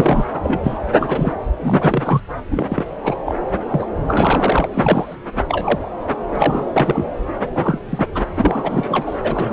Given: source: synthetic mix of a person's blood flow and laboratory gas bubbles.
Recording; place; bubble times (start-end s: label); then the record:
Doppler ultrasound of blood flow; subclavian vein
0.00-0.25 s: bubbles
0.32-0.60 s: bubbles
0.63-0.78 s: bubbles
0.99-1.33 s: bubbles
1.61-2.23 s: bubbles
2.51-2.85 s: bubbles
3.02-3.16 s: bubbles
3.25-3.39 s: bubbles
3.69-3.86 s: bubbles
4.07-4.67 s: bubbles
4.72-5.15 s: bubbles
5.48-5.91 s: bubbles
6.35-6.65 s: bubbles
6.73-7.05 s: bubbles
7.54-7.79 s: bubbles
7.89-8.06 s: bubbles
8.14-8.26 s: bubbles
8.34-9.19 s: bubbles
9.22-9.52 s: bubbles
From the record:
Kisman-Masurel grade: 243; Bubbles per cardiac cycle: several, 3 to 8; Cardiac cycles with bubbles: 100%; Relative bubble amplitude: loud (0.450 to 0.775); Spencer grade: 3 (all of the cardiac periods contain showers or single bubble signals, but not dominating or overriding the cardiac motion signals); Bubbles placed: anywhere in the cardiac cycle